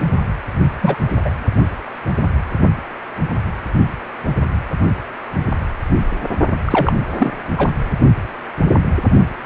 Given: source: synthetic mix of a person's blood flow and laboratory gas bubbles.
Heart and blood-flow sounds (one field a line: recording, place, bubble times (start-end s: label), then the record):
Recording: Doppler ultrasound of blood flow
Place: precordium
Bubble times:
0.80-0.97 s: bubbles
1.25-1.30 s: bubbles
6.65-6.92 s: bubbles
7.17-7.33 s: bubbles
7.57-7.70 s: bubbles
From the record:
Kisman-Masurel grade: 223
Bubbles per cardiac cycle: several, 3 to 8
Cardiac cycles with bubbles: 10 to 50%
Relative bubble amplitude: loud (0.450 to 0.775)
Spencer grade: 2 (many but less than half of the cardiac periods contain bubble signals, singularly or in groups)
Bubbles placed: only in the low amplitude regions of the cardiac cycle